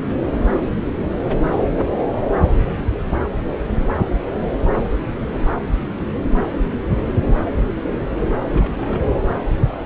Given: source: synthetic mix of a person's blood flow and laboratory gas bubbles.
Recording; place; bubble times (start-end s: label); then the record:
Doppler ultrasound of blood flow; subclavian vein
8.49-8.72 s: bubbles
8.77-9.21 s: bubbles
From the record:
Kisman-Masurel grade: 211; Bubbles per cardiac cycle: several, 3 to 8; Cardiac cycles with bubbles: 1 to 10%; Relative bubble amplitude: barely perceptible (0.100 to 0.250); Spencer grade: 1 (occasional bubble signal discernible with the cardiac motion signal, with majority of cardiac periods free of bubbles); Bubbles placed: anywhere in the cardiac cycle